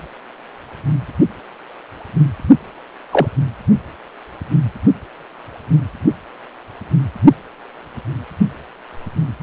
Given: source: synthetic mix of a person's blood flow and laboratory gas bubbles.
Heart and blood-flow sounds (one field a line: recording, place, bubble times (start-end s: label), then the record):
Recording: Doppler ultrasound of blood flow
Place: precordium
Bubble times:
3.12-3.28 s: bubbles
From the record:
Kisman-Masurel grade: 113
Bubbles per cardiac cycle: 1 to 2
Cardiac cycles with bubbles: 1 to 10%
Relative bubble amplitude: loud (0.450 to 0.775)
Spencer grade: 1 (occasional bubble signal discernible with the cardiac motion signal, with majority of cardiac periods free of bubbles)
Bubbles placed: anywhere in the cardiac cycle